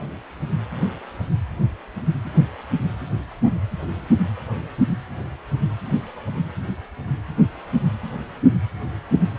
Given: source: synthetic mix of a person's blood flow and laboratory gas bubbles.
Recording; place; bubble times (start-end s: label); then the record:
Doppler ultrasound of blood flow; precordium
no bubbles
From the record:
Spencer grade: 0 (complete lack of bubble signals)